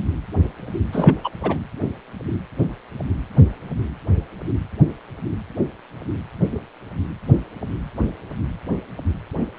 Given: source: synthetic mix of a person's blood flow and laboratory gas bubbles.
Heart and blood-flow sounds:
Doppler ultrasound of blood flow; precordium
0.92-1.21 s: bubbles
1.24-1.30 s: bubbles
1.43-1.59 s: bubbles
From the record:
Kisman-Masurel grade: 212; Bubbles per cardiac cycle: several, 3 to 8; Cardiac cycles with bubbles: 1 to 10%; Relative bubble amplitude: moderate (0.250 to 0.450); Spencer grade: 1 (occasional bubble signal discernible with the cardiac motion signal, with majority of cardiac periods free of bubbles); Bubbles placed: anywhere in the cardiac cycle

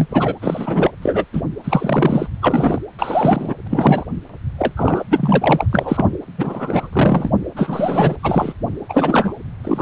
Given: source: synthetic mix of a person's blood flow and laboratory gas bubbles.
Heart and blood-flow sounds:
Doppler ultrasound of blood flow; precordium
0.00-0.07 s: bubbles
0.10-0.36 s: bubbles
0.41-0.91 s: bubbles
1.02-1.24 s: bubbles
1.32-1.42 s: bubbles
1.64-2.29 s: bubbles
2.42-2.79 s: bubbles
2.98-3.54 s: bubbles
3.70-4.05 s: bubbles
4.58-4.73 s: bubbles
4.77-5.04 s: bubbles
5.10-5.67 s: bubbles
5.71-6.12 s: bubbles
6.38-6.90 s: bubbles
6.92-7.31 s: bubbles
7.56-8.16 s: bubbles
8.23-8.54 s: bubbles
8.89-9.34 s: bubbles
9.63-9.82 s: bubbles
From the record:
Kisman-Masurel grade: 243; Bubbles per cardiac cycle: several, 3 to 8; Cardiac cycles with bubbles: 100%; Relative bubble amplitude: loud (0.450 to 0.775); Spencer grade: 3 (all of the cardiac periods contain showers or single bubble signals, but not dominating or overriding the cardiac motion signals); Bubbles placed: anywhere in the cardiac cycle

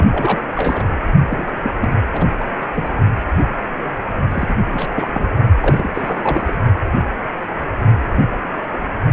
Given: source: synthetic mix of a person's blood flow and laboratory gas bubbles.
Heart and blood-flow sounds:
Doppler ultrasound of blood flow; precordium
0.00-0.09 s: bubbles
0.12-0.43 s: bubbles
0.51-0.97 s: bubbles
1.30-1.57 s: bubbles
1.64-1.71 s: bubbles
1.80-1.97 s: bubbles
2.13-2.25 s: bubbles
2.29-2.35 s: bubbles
2.39-2.46 s: bubbles
2.60-2.67 s: bubbles
2.73-2.88 s: bubbles
4.29-4.57 s: bubbles
4.73-5.11 s: bubbles
5.13-5.26 s: bubbles
5.60-5.90 s: bubbles
5.95-6.54 s: bubbles
From the record:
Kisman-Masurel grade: 332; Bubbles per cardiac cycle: rolling drumbeat, 9 or more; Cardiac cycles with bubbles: 50 to 99%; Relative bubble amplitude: moderate (0.250 to 0.450); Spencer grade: 3 (all of the cardiac periods contain showers or single bubble signals, but not dominating or overriding the cardiac motion signals); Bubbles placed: only in the low amplitude regions of the cardiac cycle

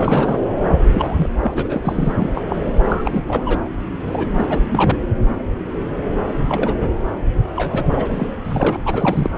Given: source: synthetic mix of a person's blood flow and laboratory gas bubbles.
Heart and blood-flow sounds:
Doppler ultrasound of blood flow; subclavian vein
0.00-0.38 s: bubbles
0.92-1.29 s: bubbles
1.40-2.12 s: bubbles
2.19-2.30 s: bubbles
2.34-2.42 s: bubbles
2.49-2.57 s: bubbles
2.62-2.72 s: bubbles
2.88-3.23 s: bubbles
3.28-3.60 s: bubbles
4.06-4.26 s: bubbles
4.37-4.59 s: bubbles
4.71-4.96 s: bubbles
6.49-6.92 s: bubbles
7.56-7.86 s: bubbles
7.92-8.08 s: bubbles
8.10-8.27 s: bubbles
8.44-8.77 s: bubbles
8.85-9.30 s: bubbles
From the record:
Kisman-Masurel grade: 232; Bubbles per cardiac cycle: several, 3 to 8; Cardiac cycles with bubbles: 50 to 99%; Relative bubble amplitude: moderate (0.250 to 0.450); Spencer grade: 3 (all of the cardiac periods contain showers or single bubble signals, but not dominating or overriding the cardiac motion signals); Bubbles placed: anywhere in the cardiac cycle

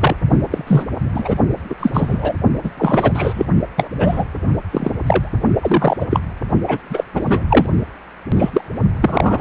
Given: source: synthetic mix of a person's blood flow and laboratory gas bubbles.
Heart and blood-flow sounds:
Doppler ultrasound of blood flow; precordium
0.01-0.16 s: bubbles
0.51-0.64 s: bubbles
0.67-0.85 s: bubbles
1.14-1.35 s: bubbles
1.70-1.75 s: bubbles
1.80-1.90 s: bubbles
1.93-2.34 s: bubbles
2.63-2.71 s: bubbles
2.78-3.46 s: bubbles
3.77-3.88 s: bubbles
3.99-4.24 s: bubbles
4.71-4.95 s: bubbles
5.07-5.31 s: bubbles
5.61-5.97 s: bubbles
6.00-6.06 s: bubbles
6.11-6.20 s: bubbles
6.67-6.78 s: bubbles
6.90-7.04 s: bubbles
7.14-7.42 s: bubbles
7.49-7.66 s: bubbles
8.36-8.50 s: bubbles
8.53-8.61 s: bubbles
9.01-9.41 s: bubbles
From the record:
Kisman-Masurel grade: 243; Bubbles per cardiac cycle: several, 3 to 8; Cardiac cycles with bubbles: 100%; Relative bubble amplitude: loud (0.450 to 0.775); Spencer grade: 3 (all of the cardiac periods contain showers or single bubble signals, but not dominating or overriding the cardiac motion signals); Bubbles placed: only in the low amplitude regions of the cardiac cycle

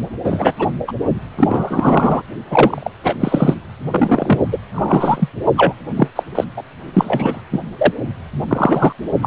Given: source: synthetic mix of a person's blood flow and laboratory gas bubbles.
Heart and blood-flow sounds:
Doppler ultrasound of blood flow; precordium
0.24-0.52 s: bubbles
0.58-0.68 s: bubbles
0.87-0.93 s: bubbles
1.38-2.22 s: bubbles
2.50-2.89 s: bubbles
3.03-3.15 s: bubbles
3.19-3.54 s: bubbles
3.91-4.42 s: bubbles
4.52-4.58 s: bubbles
4.73-5.30 s: bubbles
5.56-5.73 s: bubbles
5.96-6.08 s: bubbles
6.16-6.23 s: bubbles
6.35-6.44 s: bubbles
6.57-6.62 s: bubbles
6.93-7.42 s: bubbles
7.52-7.59 s: bubbles
7.78-7.93 s: bubbles
8.48-8.93 s: bubbles
9.22-9.27 s: bubbles
From the record:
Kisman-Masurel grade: 243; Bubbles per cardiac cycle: several, 3 to 8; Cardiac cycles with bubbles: 100%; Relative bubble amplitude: loud (0.450 to 0.775); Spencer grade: 3 (all of the cardiac periods contain showers or single bubble signals, but not dominating or overriding the cardiac motion signals); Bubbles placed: only in the low amplitude regions of the cardiac cycle

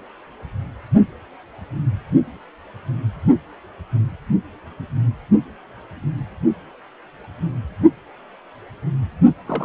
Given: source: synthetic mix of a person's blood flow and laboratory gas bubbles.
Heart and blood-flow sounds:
Doppler ultrasound of blood flow; precordium
9.45-9.65 s: bubbles
From the record:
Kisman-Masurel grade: 221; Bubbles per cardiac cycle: several, 3 to 8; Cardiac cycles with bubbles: 10 to 50%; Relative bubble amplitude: barely perceptible (0.100 to 0.250); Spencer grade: 2 (many but less than half of the cardiac periods contain bubble signals, singularly or in groups); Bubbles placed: only in the low amplitude regions of the cardiac cycle

